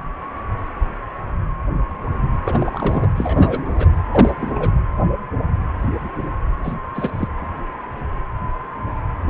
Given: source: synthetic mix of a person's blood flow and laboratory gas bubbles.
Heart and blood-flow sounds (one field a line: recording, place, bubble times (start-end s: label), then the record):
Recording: Doppler ultrasound of blood flow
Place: precordium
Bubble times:
2.44-3.12 s: bubbles
3.16-3.90 s: bubbles
4.11-4.34 s: bubbles
4.40-4.51 s: bubbles
4.55-4.70 s: bubbles
6.63-6.74 s: bubbles
6.94-7.10 s: bubbles
7.13-7.27 s: bubbles
From the record:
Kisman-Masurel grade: 222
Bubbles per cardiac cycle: several, 3 to 8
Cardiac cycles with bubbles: 10 to 50%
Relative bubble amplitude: moderate (0.250 to 0.450)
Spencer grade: 2 (many but less than half of the cardiac periods contain bubble signals, singularly or in groups)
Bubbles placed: anywhere in the cardiac cycle